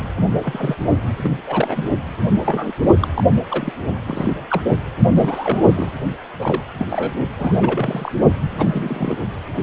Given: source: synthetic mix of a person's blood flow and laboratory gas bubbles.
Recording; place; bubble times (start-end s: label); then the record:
Doppler ultrasound of blood flow; precordium
0.38-0.76 s: bubbles
1.24-1.30 s: bubbles
1.47-1.83 s: bubbles
2.46-2.73 s: bubbles
3.01-3.08 s: bubbles
3.14-3.24 s: bubbles
3.50-3.73 s: bubbles
4.06-4.33 s: bubbles
4.48-4.62 s: bubbles
5.14-5.92 s: bubbles
6.39-6.63 s: bubbles
6.74-6.86 s: bubbles
6.89-7.13 s: bubbles
7.31-8.12 s: bubbles
8.55-9.17 s: bubbles
9.56-9.63 s: bubbles
From the record:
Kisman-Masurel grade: 242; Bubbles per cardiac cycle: several, 3 to 8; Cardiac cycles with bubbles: 100%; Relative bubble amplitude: moderate (0.250 to 0.450); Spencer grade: 3 (all of the cardiac periods contain showers or single bubble signals, but not dominating or overriding the cardiac motion signals); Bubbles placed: only in the low amplitude regions of the cardiac cycle